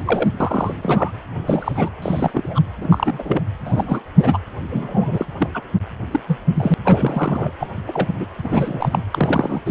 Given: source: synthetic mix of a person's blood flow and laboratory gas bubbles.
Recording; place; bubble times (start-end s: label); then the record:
Doppler ultrasound of blood flow; precordium
0.00-0.31 s: bubbles
0.40-0.73 s: bubbles
0.82-1.11 s: bubbles
1.47-1.91 s: bubbles
2.02-2.62 s: bubbles
2.81-3.42 s: bubbles
3.65-4.04 s: bubbles
4.19-4.38 s: bubbles
4.70-5.26 s: bubbles
5.39-5.49 s: bubbles
5.54-5.62 s: bubbles
6.11-6.20 s: bubbles
6.28-6.39 s: bubbles
6.57-6.74 s: bubbles
6.84-7.53 s: bubbles
7.59-7.68 s: bubbles
7.87-8.08 s: bubbles
8.19-8.26 s: bubbles
8.44-9.05 s: bubbles
9.11-9.62 s: bubbles
9.66-9.71 s: bubbles
From the record:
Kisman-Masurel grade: 242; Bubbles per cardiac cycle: several, 3 to 8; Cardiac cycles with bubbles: 100%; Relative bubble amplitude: moderate (0.250 to 0.450); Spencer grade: 3 (all of the cardiac periods contain showers or single bubble signals, but not dominating or overriding the cardiac motion signals); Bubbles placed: anywhere in the cardiac cycle